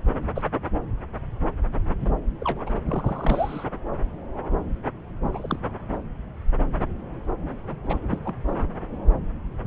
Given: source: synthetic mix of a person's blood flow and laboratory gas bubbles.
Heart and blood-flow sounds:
Doppler ultrasound of blood flow; subclavian vein
0.35-0.50 s: bubbles
2.00-2.12 s: bubbles
2.41-2.64 s: bubbles
2.66-2.74 s: bubbles
2.86-3.64 s: bubbles
5.32-5.59 s: bubbles
7.83-7.99 s: bubbles
8.12-8.19 s: bubbles
8.23-8.35 s: bubbles
8.46-8.64 s: bubbles
From the record:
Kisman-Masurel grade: 232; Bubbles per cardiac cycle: several, 3 to 8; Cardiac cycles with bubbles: 50 to 99%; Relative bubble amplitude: moderate (0.250 to 0.450); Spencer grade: 3 (all of the cardiac periods contain showers or single bubble signals, but not dominating or overriding the cardiac motion signals); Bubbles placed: anywhere in the cardiac cycle

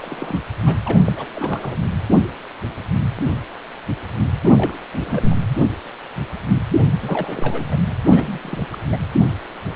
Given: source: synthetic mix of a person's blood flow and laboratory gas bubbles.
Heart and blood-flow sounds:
Doppler ultrasound of blood flow; precordium
0.00-0.40 s: bubbles
0.66-0.75 s: bubbles
0.85-0.98 s: bubbles
1.04-1.13 s: bubbles
1.17-1.27 s: bubbles
1.35-1.77 s: bubbles
4.42-4.77 s: bubbles
4.92-5.37 s: bubbles
7.02-7.62 s: bubbles
7.71-7.75 s: bubbles
8.08-8.67 s: bubbles
8.72-8.79 s: bubbles
8.89-8.98 s: bubbles
From the record:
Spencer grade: 2 (many but less than half of the cardiac periods contain bubble signals, singularly or in groups); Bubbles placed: anywhere in the cardiac cycle

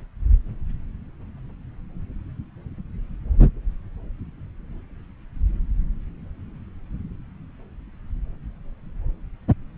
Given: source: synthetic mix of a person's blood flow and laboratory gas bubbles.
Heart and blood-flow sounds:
Doppler ultrasound of blood flow; subclavian vein
no bubbles
From the record:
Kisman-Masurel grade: 000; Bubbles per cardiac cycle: 0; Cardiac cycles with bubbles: 0%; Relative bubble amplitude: no bubbles discernible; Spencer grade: 0 (complete lack of bubble signals)

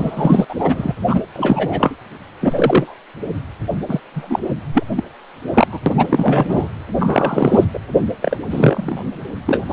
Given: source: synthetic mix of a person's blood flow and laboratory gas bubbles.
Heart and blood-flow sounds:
Doppler ultrasound of blood flow; precordium
0.00-0.45 s: bubbles
0.49-0.55 s: bubbles
0.58-0.94 s: bubbles
1.07-1.20 s: bubbles
1.35-1.96 s: bubbles
2.41-2.94 s: bubbles
3.88-4.00 s: bubbles
4.13-4.41 s: bubbles
4.74-4.83 s: bubbles
4.96-5.04 s: bubbles
5.53-5.67 s: bubbles
5.71-5.79 s: bubbles
5.86-6.68 s: bubbles
6.99-7.64 s: bubbles
7.74-7.79 s: bubbles
8.21-8.37 s: bubbles
8.50-9.06 s: bubbles
9.46-9.64 s: bubbles
9.70-9.73 s: bubbles
From the record:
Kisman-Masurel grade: 233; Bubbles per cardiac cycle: several, 3 to 8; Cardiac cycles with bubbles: 50 to 99%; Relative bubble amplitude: loud (0.450 to 0.775); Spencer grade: 3 (all of the cardiac periods contain showers or single bubble signals, but not dominating or overriding the cardiac motion signals); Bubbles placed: anywhere in the cardiac cycle

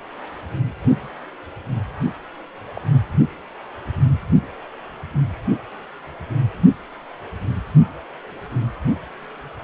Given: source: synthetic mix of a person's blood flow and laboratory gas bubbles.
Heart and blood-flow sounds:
Doppler ultrasound of blood flow; precordium
2.75-2.81 s: bubbles
2.91-2.96 s: bubbles
From the record:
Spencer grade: 2 (many but less than half of the cardiac periods contain bubble signals, singularly or in groups); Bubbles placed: only in the low amplitude regions of the cardiac cycle

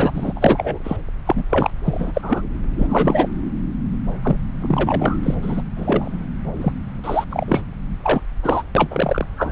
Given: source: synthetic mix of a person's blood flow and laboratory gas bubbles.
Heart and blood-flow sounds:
Doppler ultrasound of blood flow; subclavian vein
0.00-0.33 s: bubbles
0.35-0.78 s: bubbles
0.84-0.97 s: bubbles
1.26-1.45 s: bubbles
1.49-1.70 s: bubbles
1.84-2.47 s: bubbles
2.78-3.29 s: bubbles
4.23-4.37 s: bubbles
4.61-5.19 s: bubbles
5.23-5.35 s: bubbles
5.42-5.62 s: bubbles
5.77-6.27 s: bubbles
6.57-6.73 s: bubbles
7.04-7.25 s: bubbles
7.29-7.46 s: bubbles
7.48-7.62 s: bubbles
8.02-8.20 s: bubbles
8.42-8.63 s: bubbles
8.75-9.26 s: bubbles
9.36-9.52 s: bubbles
From the record:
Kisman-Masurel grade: 243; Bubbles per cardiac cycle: several, 3 to 8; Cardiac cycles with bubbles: 100%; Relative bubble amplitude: loud (0.450 to 0.775); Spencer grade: 3 (all of the cardiac periods contain showers or single bubble signals, but not dominating or overriding the cardiac motion signals); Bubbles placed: anywhere in the cardiac cycle

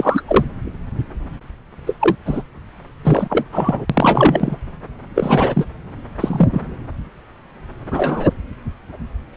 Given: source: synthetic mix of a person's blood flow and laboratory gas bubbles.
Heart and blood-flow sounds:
Doppler ultrasound of blood flow; subclavian vein
0.00-0.22 s: bubbles
0.28-0.45 s: bubbles
1.86-1.96 s: bubbles
2.00-2.16 s: bubbles
2.25-2.42 s: bubbles
3.03-3.44 s: bubbles
3.52-3.85 s: bubbles
3.89-4.56 s: bubbles
5.15-5.65 s: bubbles
6.20-6.62 s: bubbles
7.91-8.29 s: bubbles
From the record:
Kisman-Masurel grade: 233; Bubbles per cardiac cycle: several, 3 to 8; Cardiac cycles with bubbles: 50 to 99%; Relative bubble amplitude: loud (0.450 to 0.775); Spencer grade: 3 (all of the cardiac periods contain showers or single bubble signals, but not dominating or overriding the cardiac motion signals); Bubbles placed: anywhere in the cardiac cycle

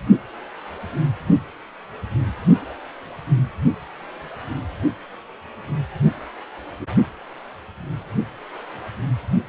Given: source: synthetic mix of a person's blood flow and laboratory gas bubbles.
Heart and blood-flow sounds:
Doppler ultrasound of blood flow; precordium
no bubbles
From the record:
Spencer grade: 0 (complete lack of bubble signals)

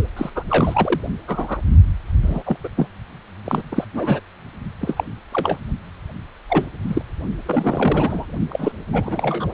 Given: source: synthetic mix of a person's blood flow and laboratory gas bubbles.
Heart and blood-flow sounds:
Doppler ultrasound of blood flow; precordium
0.16-0.30 s: bubbles
0.35-0.43 s: bubbles
0.48-1.00 s: bubbles
1.27-1.61 s: bubbles
2.22-2.42 s: bubbles
2.45-2.56 s: bubbles
2.63-2.68 s: bubbles
2.75-2.87 s: bubbles
3.45-3.62 s: bubbles
3.71-3.84 s: bubbles
3.93-4.20 s: bubbles
4.81-5.04 s: bubbles
5.32-5.58 s: bubbles
6.49-6.65 s: bubbles
6.87-7.01 s: bubbles
7.46-8.26 s: bubbles
8.50-8.72 s: bubbles
8.93-9.46 s: bubbles
From the record:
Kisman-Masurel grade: 242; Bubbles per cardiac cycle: several, 3 to 8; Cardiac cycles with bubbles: 100%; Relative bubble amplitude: moderate (0.250 to 0.450); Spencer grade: 3 (all of the cardiac periods contain showers or single bubble signals, but not dominating or overriding the cardiac motion signals); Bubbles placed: only in the low amplitude regions of the cardiac cycle

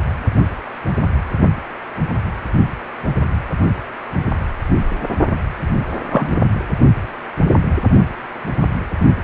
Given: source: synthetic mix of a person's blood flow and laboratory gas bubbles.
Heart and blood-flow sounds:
Doppler ultrasound of blood flow; precordium
6.10-6.36 s: bubbles
From the record:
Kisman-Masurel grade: 113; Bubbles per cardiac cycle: 1 to 2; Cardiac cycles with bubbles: 1 to 10%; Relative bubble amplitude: loud (0.450 to 0.775); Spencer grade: 1 (occasional bubble signal discernible with the cardiac motion signal, with majority of cardiac periods free of bubbles); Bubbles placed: only in the low amplitude regions of the cardiac cycle

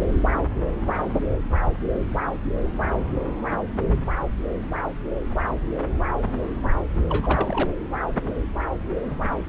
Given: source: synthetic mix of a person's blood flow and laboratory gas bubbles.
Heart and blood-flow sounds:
Doppler ultrasound of blood flow; subclavian vein
7.08-7.73 s: bubbles
From the record:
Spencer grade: 1 (occasional bubble signal discernible with the cardiac motion signal, with majority of cardiac periods free of bubbles); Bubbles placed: anywhere in the cardiac cycle

